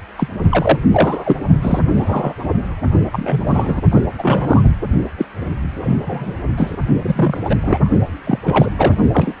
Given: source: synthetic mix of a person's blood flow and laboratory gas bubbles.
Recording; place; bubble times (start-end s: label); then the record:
Doppler ultrasound of blood flow; precordium
0.18-0.28 s: bubbles
0.51-0.80 s: bubbles
0.91-1.36 s: bubbles
1.62-1.81 s: bubbles
1.96-2.33 s: bubbles
3.12-3.81 s: bubbles
3.91-4.02 s: bubbles
4.18-4.73 s: bubbles
5.18-5.25 s: bubbles
5.83-6.34 s: bubbles
6.57-6.77 s: bubbles
6.99-7.56 s: bubbles
7.61-7.89 s: bubbles
8.26-8.39 s: bubbles
8.43-8.71 s: bubbles
8.77-8.94 s: bubbles
9.12-9.33 s: bubbles
From the record:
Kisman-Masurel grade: 233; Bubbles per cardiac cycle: several, 3 to 8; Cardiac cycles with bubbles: 50 to 99%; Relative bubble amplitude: loud (0.450 to 0.775); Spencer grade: 3 (all of the cardiac periods contain showers or single bubble signals, but not dominating or overriding the cardiac motion signals); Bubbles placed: only in the low amplitude regions of the cardiac cycle